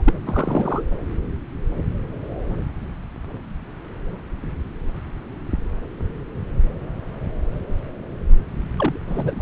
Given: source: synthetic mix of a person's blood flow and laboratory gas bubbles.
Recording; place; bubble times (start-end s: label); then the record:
Doppler ultrasound of blood flow; subclavian vein
0.00-0.14 s: bubbles
0.27-0.83 s: bubbles
8.79-8.98 s: bubbles
9.07-9.42 s: bubbles
From the record:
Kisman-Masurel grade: 222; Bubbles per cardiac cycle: several, 3 to 8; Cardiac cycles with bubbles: 10 to 50%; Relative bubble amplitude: moderate (0.250 to 0.450); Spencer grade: 2 (many but less than half of the cardiac periods contain bubble signals, singularly or in groups); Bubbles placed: anywhere in the cardiac cycle